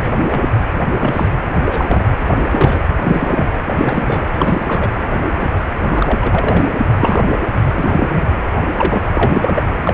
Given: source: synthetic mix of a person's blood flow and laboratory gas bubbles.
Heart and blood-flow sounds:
Doppler ultrasound of blood flow; precordium
0.00-0.43 s: bubbles
1.00-1.32 s: bubbles
1.63-2.04 s: bubbles
2.27-2.43 s: bubbles
2.49-2.83 s: bubbles
3.03-3.47 s: bubbles
3.65-4.24 s: bubbles
4.38-4.89 s: bubbles
5.40-5.50 s: bubbles
5.91-6.74 s: bubbles
7.00-7.24 s: bubbles
7.75-8.22 s: bubbles
8.78-9.04 s: bubbles
9.15-9.75 s: bubbles
9.84-9.94 s: bubbles
From the record:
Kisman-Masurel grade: 242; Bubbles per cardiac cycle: several, 3 to 8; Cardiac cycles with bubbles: 100%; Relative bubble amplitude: moderate (0.250 to 0.450); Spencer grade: 3 (all of the cardiac periods contain showers or single bubble signals, but not dominating or overriding the cardiac motion signals); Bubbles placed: anywhere in the cardiac cycle

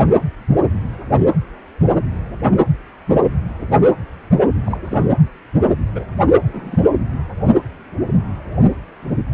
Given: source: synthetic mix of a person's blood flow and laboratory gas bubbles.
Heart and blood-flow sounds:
Doppler ultrasound of blood flow; precordium
3.55-3.65 s: bubbles
4.65-4.78 s: bubbles
4.84-4.98 s: bubbles
5.95-6.04 s: bubbles
6.43-6.78 s: bubbles
From the record:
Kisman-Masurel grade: 121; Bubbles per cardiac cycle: 1 to 2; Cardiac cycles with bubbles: 10 to 50%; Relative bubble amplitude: barely perceptible (0.100 to 0.250); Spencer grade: 2 (many but less than half of the cardiac periods contain bubble signals, singularly or in groups); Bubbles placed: anywhere in the cardiac cycle

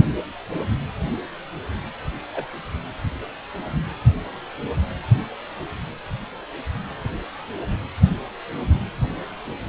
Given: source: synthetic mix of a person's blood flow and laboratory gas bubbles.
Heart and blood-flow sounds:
Doppler ultrasound of blood flow; precordium
2.32-2.47 s: bubbles
From the record:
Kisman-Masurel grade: 121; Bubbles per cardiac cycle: 1 to 2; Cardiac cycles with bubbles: 10 to 50%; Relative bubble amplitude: barely perceptible (0.100 to 0.250); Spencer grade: 2 (many but less than half of the cardiac periods contain bubble signals, singularly or in groups); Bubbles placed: anywhere in the cardiac cycle

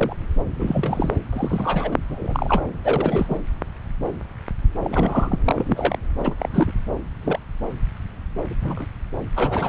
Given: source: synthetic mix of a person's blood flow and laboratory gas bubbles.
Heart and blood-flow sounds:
Doppler ultrasound of blood flow; subclavian vein
0.00-0.14 s: bubbles
0.55-1.11 s: bubbles
1.32-1.96 s: bubbles
2.10-2.62 s: bubbles
2.84-3.37 s: bubbles
4.80-5.38 s: bubbles
5.45-5.99 s: bubbles
6.18-6.35 s: bubbles
6.38-6.71 s: bubbles
7.23-7.39 s: bubbles
8.46-8.87 s: bubbles
9.36-9.69 s: bubbles
From the record:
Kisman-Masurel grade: 232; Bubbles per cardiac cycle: several, 3 to 8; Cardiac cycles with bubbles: 50 to 99%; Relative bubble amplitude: moderate (0.250 to 0.450); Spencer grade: 3 (all of the cardiac periods contain showers or single bubble signals, but not dominating or overriding the cardiac motion signals); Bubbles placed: anywhere in the cardiac cycle

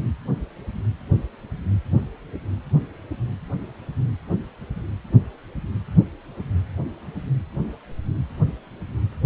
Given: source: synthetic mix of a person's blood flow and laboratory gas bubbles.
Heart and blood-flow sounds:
Doppler ultrasound of blood flow; precordium
no bubbles
From the record:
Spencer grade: 0 (complete lack of bubble signals)

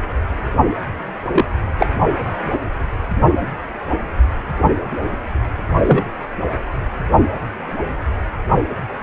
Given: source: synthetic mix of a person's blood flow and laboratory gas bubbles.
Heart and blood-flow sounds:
Doppler ultrasound of blood flow; precordium
1.32-1.46 s: bubbles
1.78-1.86 s: bubbles
5.84-6.04 s: bubbles
From the record:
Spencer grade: 2 (many but less than half of the cardiac periods contain bubble signals, singularly or in groups); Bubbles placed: anywhere in the cardiac cycle

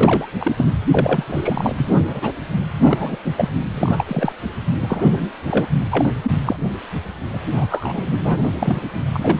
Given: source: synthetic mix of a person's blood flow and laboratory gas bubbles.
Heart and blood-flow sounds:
Doppler ultrasound of blood flow; precordium
0.00-0.28 s: bubbles
0.40-0.52 s: bubbles
0.56-0.71 s: bubbles
0.88-1.24 s: bubbles
1.27-1.95 s: bubbles
2.07-2.32 s: bubbles
2.83-3.17 s: bubbles
3.25-3.32 s: bubbles
3.37-3.50 s: bubbles
3.71-4.33 s: bubbles
4.79-5.30 s: bubbles
5.47-5.71 s: bubbles
5.91-6.14 s: bubbles
6.22-6.31 s: bubbles
6.46-6.56 s: bubbles
7.33-7.42 s: bubbles
7.52-7.67 s: bubbles
7.70-8.48 s: bubbles
8.54-8.80 s: bubbles
9.13-9.40 s: bubbles
From the record:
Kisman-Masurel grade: 243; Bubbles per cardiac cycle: several, 3 to 8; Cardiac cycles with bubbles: 100%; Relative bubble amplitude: loud (0.450 to 0.775); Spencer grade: 3 (all of the cardiac periods contain showers or single bubble signals, but not dominating or overriding the cardiac motion signals); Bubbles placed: anywhere in the cardiac cycle

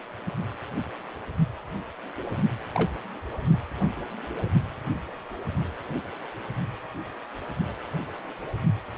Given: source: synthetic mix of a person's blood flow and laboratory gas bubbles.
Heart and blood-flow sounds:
Doppler ultrasound of blood flow; precordium
2.75-2.94 s: bubbles
From the record:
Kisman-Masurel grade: 111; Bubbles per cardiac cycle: 1 to 2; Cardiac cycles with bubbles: 1 to 10%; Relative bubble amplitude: barely perceptible (0.100 to 0.250); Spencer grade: 1 (occasional bubble signal discernible with the cardiac motion signal, with majority of cardiac periods free of bubbles); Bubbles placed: only in the low amplitude regions of the cardiac cycle

